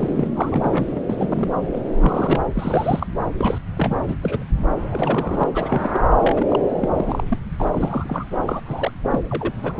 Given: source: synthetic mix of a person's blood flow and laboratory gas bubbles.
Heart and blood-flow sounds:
Doppler ultrasound of blood flow; subclavian vein
0.00-0.27 s: bubbles
0.36-1.01 s: bubbles
1.09-1.52 s: bubbles
1.72-1.82 s: bubbles
1.93-2.40 s: bubbles
2.54-3.06 s: bubbles
3.38-3.58 s: bubbles
3.76-3.96 s: bubbles
4.08-4.15 s: bubbles
4.21-4.44 s: bubbles
4.89-5.43 s: bubbles
5.54-6.00 s: bubbles
6.22-6.46 s: bubbles
6.50-6.59 s: bubbles
6.81-6.88 s: bubbles
6.94-7.24 s: bubbles
7.29-7.38 s: bubbles
7.58-7.67 s: bubbles
7.71-8.25 s: bubbles
8.45-8.61 s: bubbles
8.66-8.91 s: bubbles
9.11-9.19 s: bubbles
9.29-9.53 s: bubbles
9.62-9.74 s: bubbles
From the record:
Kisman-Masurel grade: 242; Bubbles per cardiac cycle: several, 3 to 8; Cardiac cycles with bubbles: 100%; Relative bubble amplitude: moderate (0.250 to 0.450); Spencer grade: 3 (all of the cardiac periods contain showers or single bubble signals, but not dominating or overriding the cardiac motion signals); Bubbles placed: anywhere in the cardiac cycle

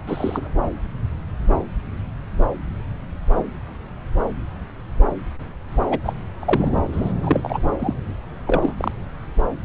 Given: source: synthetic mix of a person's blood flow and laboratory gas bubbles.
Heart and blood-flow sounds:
Doppler ultrasound of blood flow; subclavian vein
0.07-0.48 s: bubbles
5.90-5.99 s: bubbles
6.03-6.12 s: bubbles
6.39-6.81 s: bubbles
6.92-7.14 s: bubbles
7.23-7.59 s: bubbles
7.79-7.94 s: bubbles
8.47-8.74 s: bubbles
8.77-8.92 s: bubbles
From the record:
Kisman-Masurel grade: 222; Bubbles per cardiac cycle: several, 3 to 8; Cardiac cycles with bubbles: 10 to 50%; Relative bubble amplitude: moderate (0.250 to 0.450); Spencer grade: 2 (many but less than half of the cardiac periods contain bubble signals, singularly or in groups); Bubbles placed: anywhere in the cardiac cycle

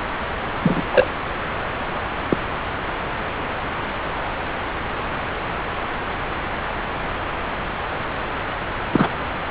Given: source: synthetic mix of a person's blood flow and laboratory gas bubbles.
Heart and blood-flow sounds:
Doppler ultrasound of blood flow; subclavian vein
0.63-0.83 s: bubbles
0.91-1.07 s: bubbles
2.30-2.37 s: bubbles
8.92-9.08 s: bubbles
From the record:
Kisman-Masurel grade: 123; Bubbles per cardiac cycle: 1 to 2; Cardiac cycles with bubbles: 10 to 50%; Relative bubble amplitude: loud (0.450 to 0.775); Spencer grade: 2 (many but less than half of the cardiac periods contain bubble signals, singularly or in groups); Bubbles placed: anywhere in the cardiac cycle

